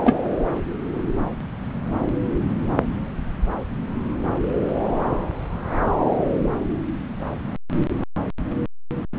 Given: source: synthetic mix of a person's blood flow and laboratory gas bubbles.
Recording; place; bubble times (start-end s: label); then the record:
Doppler ultrasound of blood flow; subclavian vein
0.04-0.15 s: bubbles
From the record:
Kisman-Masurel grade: 213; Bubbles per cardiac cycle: several, 3 to 8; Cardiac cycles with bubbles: 1 to 10%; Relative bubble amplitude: loud (0.450 to 0.775); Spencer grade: 1 (occasional bubble signal discernible with the cardiac motion signal, with majority of cardiac periods free of bubbles); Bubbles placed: anywhere in the cardiac cycle